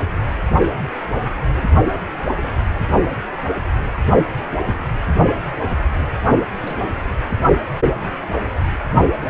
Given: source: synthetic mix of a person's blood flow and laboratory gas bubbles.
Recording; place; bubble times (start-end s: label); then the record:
Doppler ultrasound of blood flow; precordium
2.12-2.24 s: bubbles
2.43-2.48 s: bubbles
5.59-5.67 s: bubbles
6.61-6.99 s: bubbles
From the record:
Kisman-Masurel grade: 121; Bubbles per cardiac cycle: 1 to 2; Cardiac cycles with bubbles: 10 to 50%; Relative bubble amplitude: barely perceptible (0.100 to 0.250); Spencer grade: 2 (many but less than half of the cardiac periods contain bubble signals, singularly or in groups); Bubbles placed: only in the low amplitude regions of the cardiac cycle